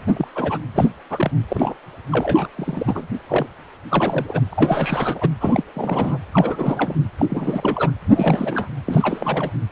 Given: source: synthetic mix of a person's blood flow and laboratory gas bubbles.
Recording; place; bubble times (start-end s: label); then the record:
Doppler ultrasound of blood flow; precordium
0.09-0.28 s: bubbles
0.35-0.57 s: bubbles
0.74-0.91 s: bubbles
1.10-1.31 s: bubbles
1.48-1.74 s: bubbles
2.12-2.48 s: bubbles
2.57-3.07 s: bubbles
3.28-3.47 s: bubbles
3.91-4.42 s: bubbles
4.51-5.29 s: bubbles
5.40-5.63 s: bubbles
5.75-6.18 s: bubbles
6.33-6.96 s: bubbles
7.18-7.91 s: bubbles
8.09-8.68 s: bubbles
8.85-9.51 s: bubbles
From the record:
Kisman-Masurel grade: 342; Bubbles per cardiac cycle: rolling drumbeat, 9 or more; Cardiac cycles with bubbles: 100%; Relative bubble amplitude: moderate (0.250 to 0.450); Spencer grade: 3 (all of the cardiac periods contain showers or single bubble signals, but not dominating or overriding the cardiac motion signals); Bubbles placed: anywhere in the cardiac cycle